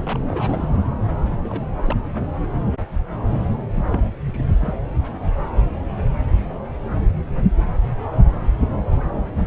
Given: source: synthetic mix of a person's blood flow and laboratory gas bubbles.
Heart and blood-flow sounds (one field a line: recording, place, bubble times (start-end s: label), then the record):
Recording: Doppler ultrasound of blood flow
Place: subclavian vein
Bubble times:
0.00-0.18 s: bubbles
0.27-0.69 s: bubbles
0.73-0.91 s: bubbles
1.44-1.67 s: bubbles
1.85-1.96 s: bubbles
3.59-3.65 s: bubbles
3.76-3.86 s: bubbles
3.90-4.06 s: bubbles
4.26-4.43 s: bubbles
4.46-4.75 s: bubbles
From the record:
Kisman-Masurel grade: 221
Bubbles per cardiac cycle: several, 3 to 8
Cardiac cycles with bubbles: 10 to 50%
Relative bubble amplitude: barely perceptible (0.100 to 0.250)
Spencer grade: 2 (many but less than half of the cardiac periods contain bubble signals, singularly or in groups)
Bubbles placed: anywhere in the cardiac cycle